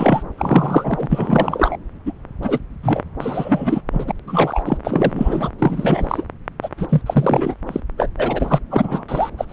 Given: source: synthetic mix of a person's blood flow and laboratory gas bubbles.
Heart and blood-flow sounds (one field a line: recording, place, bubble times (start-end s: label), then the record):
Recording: Doppler ultrasound of blood flow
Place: subclavian vein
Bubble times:
0.00-0.23 s: bubbles
0.38-1.06 s: bubbles
1.09-1.77 s: bubbles
2.06-2.12 s: bubbles
2.42-2.59 s: bubbles
2.83-3.03 s: bubbles
3.20-3.81 s: bubbles
3.91-4.12 s: bubbles
4.27-4.78 s: bubbles
4.84-5.50 s: bubbles
5.58-6.25 s: bubbles
6.62-6.69 s: bubbles
6.77-7.02 s: bubbles
7.06-7.54 s: bubbles
7.67-7.80 s: bubbles
7.98-8.09 s: bubbles
8.17-8.60 s: bubbles
8.70-9.05 s: bubbles
9.08-9.30 s: bubbles
9.38-9.45 s: bubbles
9.49-9.53 s: bubbles
From the record:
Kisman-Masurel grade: 343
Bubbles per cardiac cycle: rolling drumbeat, 9 or more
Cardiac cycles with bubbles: 100%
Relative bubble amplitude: loud (0.450 to 0.775)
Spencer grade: 3 (all of the cardiac periods contain showers or single bubble signals, but not dominating or overriding the cardiac motion signals)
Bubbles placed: anywhere in the cardiac cycle